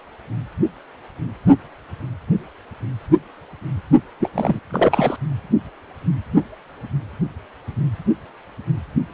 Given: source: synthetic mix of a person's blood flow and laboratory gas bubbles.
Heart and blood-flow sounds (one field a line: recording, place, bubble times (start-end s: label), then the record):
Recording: Doppler ultrasound of blood flow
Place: precordium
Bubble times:
4.20-4.29 s: bubbles
4.34-4.59 s: bubbles
4.71-5.17 s: bubbles
From the record:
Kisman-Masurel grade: 213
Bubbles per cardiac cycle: several, 3 to 8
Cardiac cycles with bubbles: 1 to 10%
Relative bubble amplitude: loud (0.450 to 0.775)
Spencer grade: 1 (occasional bubble signal discernible with the cardiac motion signal, with majority of cardiac periods free of bubbles)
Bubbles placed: only in the low amplitude regions of the cardiac cycle